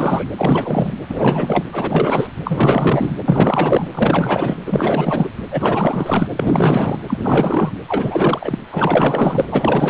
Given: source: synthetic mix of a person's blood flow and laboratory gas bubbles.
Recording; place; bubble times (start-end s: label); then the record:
Doppler ultrasound of blood flow; precordium
0.00-0.25 s: bubbles
0.37-0.93 s: bubbles
1.09-1.64 s: bubbles
1.72-2.28 s: bubbles
2.44-3.12 s: bubbles
3.25-3.88 s: bubbles
3.94-4.58 s: bubbles
4.66-5.29 s: bubbles
5.51-6.27 s: bubbles
6.37-7.00 s: bubbles
7.07-7.17 s: bubbles
7.23-7.71 s: bubbles
7.88-8.59 s: bubbles
8.71-9.47 s: bubbles
9.51-9.90 s: bubbles
From the record:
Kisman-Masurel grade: 444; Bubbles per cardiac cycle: continuous sound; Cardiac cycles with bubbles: 100%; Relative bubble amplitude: maximal (0.775 to 0.999); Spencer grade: 4 (maximum detectable bubble signal sounding continuously throughout systole and diastole of every cardiac period, and overriding the amplitude of the normal cardiac signals); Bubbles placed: anywhere in the cardiac cycle